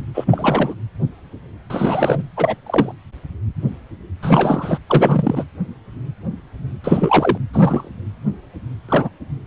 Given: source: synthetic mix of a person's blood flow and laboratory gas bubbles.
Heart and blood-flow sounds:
Doppler ultrasound of blood flow; precordium
0.14-0.76 s: bubbles
1.70-2.23 s: bubbles
2.37-2.56 s: bubbles
2.66-2.92 s: bubbles
4.22-4.79 s: bubbles
4.87-5.44 s: bubbles
6.84-7.38 s: bubbles
7.53-7.90 s: bubbles
8.88-9.10 s: bubbles
From the record:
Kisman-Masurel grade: 223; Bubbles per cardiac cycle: several, 3 to 8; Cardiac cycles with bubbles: 10 to 50%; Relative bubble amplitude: loud (0.450 to 0.775); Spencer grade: 2 (many but less than half of the cardiac periods contain bubble signals, singularly or in groups); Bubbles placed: anywhere in the cardiac cycle

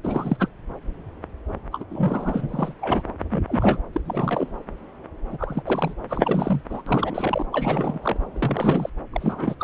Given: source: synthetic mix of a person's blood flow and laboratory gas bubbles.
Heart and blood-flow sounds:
Doppler ultrasound of blood flow; subclavian vein
0.03-0.48 s: bubbles
1.72-1.84 s: bubbles
1.89-2.74 s: bubbles
2.81-3.02 s: bubbles
3.31-3.81 s: bubbles
3.93-4.00 s: bubbles
4.05-4.48 s: bubbles
5.28-5.94 s: bubbles
6.09-6.61 s: bubbles
6.69-6.82 s: bubbles
6.86-7.46 s: bubbles
7.51-7.99 s: bubbles
8.02-8.17 s: bubbles
8.34-8.90 s: bubbles
9.12-9.54 s: bubbles
9.60-9.64 s: bubbles
From the record:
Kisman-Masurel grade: 332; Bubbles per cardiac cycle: rolling drumbeat, 9 or more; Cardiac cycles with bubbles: 50 to 99%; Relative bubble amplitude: moderate (0.250 to 0.450); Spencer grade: 3 (all of the cardiac periods contain showers or single bubble signals, but not dominating or overriding the cardiac motion signals); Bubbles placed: anywhere in the cardiac cycle

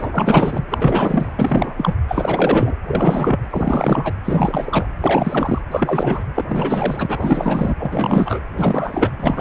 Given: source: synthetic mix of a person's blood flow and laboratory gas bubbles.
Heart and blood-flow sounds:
Doppler ultrasound of blood flow; precordium
0.00-0.65 s: bubbles
0.70-1.95 s: bubbles
2.07-2.75 s: bubbles
2.86-3.40 s: bubbles
3.49-4.15 s: bubbles
4.25-4.86 s: bubbles
5.00-5.62 s: bubbles
5.71-6.24 s: bubbles
6.34-6.44 s: bubbles
6.48-7.75 s: bubbles
7.79-8.40 s: bubbles
8.56-9.11 s: bubbles
9.19-9.41 s: bubbles
From the record:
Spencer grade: 4 (maximum detectable bubble signal sounding continuously throughout systole and diastole of every cardiac period, and overriding the amplitude of the normal cardiac signals); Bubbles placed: anywhere in the cardiac cycle

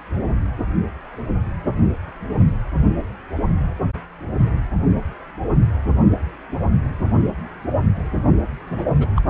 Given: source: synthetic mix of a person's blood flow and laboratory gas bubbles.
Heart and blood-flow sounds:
Doppler ultrasound of blood flow; precordium
8.70-8.88 s: bubbles
8.99-9.07 s: bubbles
9.16-9.21 s: bubbles
From the record:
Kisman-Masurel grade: 212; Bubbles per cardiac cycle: several, 3 to 8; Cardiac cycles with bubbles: 1 to 10%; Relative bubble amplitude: moderate (0.250 to 0.450); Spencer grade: 1 (occasional bubble signal discernible with the cardiac motion signal, with majority of cardiac periods free of bubbles); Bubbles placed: only in the low amplitude regions of the cardiac cycle

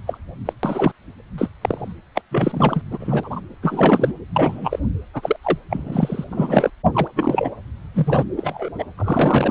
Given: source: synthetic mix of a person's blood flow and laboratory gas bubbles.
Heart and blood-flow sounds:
Doppler ultrasound of blood flow; precordium
0.07-0.18 s: bubbles
0.45-0.53 s: bubbles
0.63-0.92 s: bubbles
1.38-1.48 s: bubbles
1.61-1.93 s: bubbles
2.14-2.22 s: bubbles
2.31-2.81 s: bubbles
2.91-3.41 s: bubbles
3.62-4.12 s: bubbles
4.33-4.79 s: bubbles
5.13-5.36 s: bubbles
5.42-5.58 s: bubbles
5.69-6.25 s: bubbles
6.29-6.70 s: bubbles
6.93-7.08 s: bubbles
7.15-7.50 s: bubbles
7.94-8.24 s: bubbles
8.38-8.70 s: bubbles
8.78-8.84 s: bubbles
8.98-9.51 s: bubbles
From the record:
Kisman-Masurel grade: 243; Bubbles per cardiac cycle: several, 3 to 8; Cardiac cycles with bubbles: 100%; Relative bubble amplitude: loud (0.450 to 0.775); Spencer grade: 3 (all of the cardiac periods contain showers or single bubble signals, but not dominating or overriding the cardiac motion signals); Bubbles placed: anywhere in the cardiac cycle

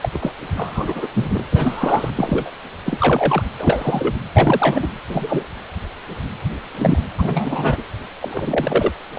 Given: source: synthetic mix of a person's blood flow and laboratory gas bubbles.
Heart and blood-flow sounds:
Doppler ultrasound of blood flow; precordium
0.01-0.09 s: bubbles
0.14-0.32 s: bubbles
0.56-1.08 s: bubbles
1.14-1.45 s: bubbles
1.50-2.10 s: bubbles
2.15-2.51 s: bubbles
2.85-3.43 s: bubbles
3.59-4.14 s: bubbles
4.36-4.87 s: bubbles
5.08-5.43 s: bubbles
6.74-6.99 s: bubbles
7.18-7.82 s: bubbles
8.21-8.92 s: bubbles
9.15-9.19 s: bubbles
From the record:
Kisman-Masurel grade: 233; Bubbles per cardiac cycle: several, 3 to 8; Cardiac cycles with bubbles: 50 to 99%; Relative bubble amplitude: loud (0.450 to 0.775); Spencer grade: 3 (all of the cardiac periods contain showers or single bubble signals, but not dominating or overriding the cardiac motion signals); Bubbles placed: anywhere in the cardiac cycle

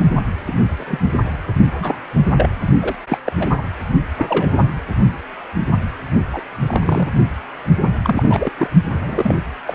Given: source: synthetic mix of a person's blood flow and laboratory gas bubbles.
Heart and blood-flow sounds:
Doppler ultrasound of blood flow; precordium
0.47-0.53 s: bubbles
0.79-0.99 s: bubbles
1.78-1.97 s: bubbles
2.35-2.49 s: bubbles
2.80-2.95 s: bubbles
3.09-3.18 s: bubbles
3.24-3.32 s: bubbles
3.39-3.48 s: bubbles
3.57-3.62 s: bubbles
4.17-4.68 s: bubbles
6.33-6.42 s: bubbles
6.67-7.09 s: bubbles
7.81-7.91 s: bubbles
8.04-8.51 s: bubbles
8.58-8.70 s: bubbles
8.92-9.35 s: bubbles
9.66-9.74 s: bubbles
From the record:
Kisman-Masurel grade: 232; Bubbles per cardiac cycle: several, 3 to 8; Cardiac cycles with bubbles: 50 to 99%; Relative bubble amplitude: moderate (0.250 to 0.450); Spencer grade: 3 (all of the cardiac periods contain showers or single bubble signals, but not dominating or overriding the cardiac motion signals); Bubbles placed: only in the low amplitude regions of the cardiac cycle

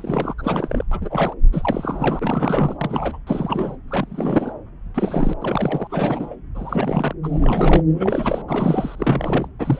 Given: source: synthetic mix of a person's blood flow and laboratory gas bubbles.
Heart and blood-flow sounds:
Doppler ultrasound of blood flow; subclavian vein
0.00-0.34 s: bubbles
0.38-0.84 s: bubbles
0.91-1.34 s: bubbles
1.52-2.77 s: bubbles
2.81-3.19 s: bubbles
3.27-3.77 s: bubbles
3.88-4.53 s: bubbles
4.94-5.33 s: bubbles
5.41-5.88 s: bubbles
5.90-6.36 s: bubbles
6.54-7.13 s: bubbles
7.23-7.83 s: bubbles
7.94-8.42 s: bubbles
8.47-9.48 s: bubbles
9.59-9.80 s: bubbles
From the record:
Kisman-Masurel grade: 342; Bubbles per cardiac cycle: rolling drumbeat, 9 or more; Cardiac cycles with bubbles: 100%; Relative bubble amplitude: moderate (0.250 to 0.450); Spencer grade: 3 (all of the cardiac periods contain showers or single bubble signals, but not dominating or overriding the cardiac motion signals); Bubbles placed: anywhere in the cardiac cycle

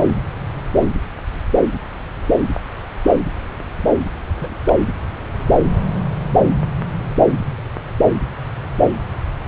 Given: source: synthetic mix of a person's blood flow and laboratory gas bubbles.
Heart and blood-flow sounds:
Doppler ultrasound of blood flow; subclavian vein
4.37-4.58 s: bubbles
4.66-4.74 s: bubbles
From the record:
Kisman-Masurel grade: 111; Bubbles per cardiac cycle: 1 to 2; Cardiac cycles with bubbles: 1 to 10%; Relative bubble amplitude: barely perceptible (0.100 to 0.250); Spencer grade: 1 (occasional bubble signal discernible with the cardiac motion signal, with majority of cardiac periods free of bubbles); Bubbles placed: anywhere in the cardiac cycle

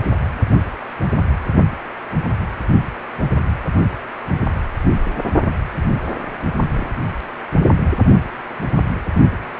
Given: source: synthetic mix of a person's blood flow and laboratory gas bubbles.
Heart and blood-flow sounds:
Doppler ultrasound of blood flow; precordium
6.70-6.86 s: bubbles
From the record:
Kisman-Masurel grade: 111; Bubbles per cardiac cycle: 1 to 2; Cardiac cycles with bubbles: 1 to 10%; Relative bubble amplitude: barely perceptible (0.100 to 0.250); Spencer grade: 1 (occasional bubble signal discernible with the cardiac motion signal, with majority of cardiac periods free of bubbles); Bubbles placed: only in the low amplitude regions of the cardiac cycle

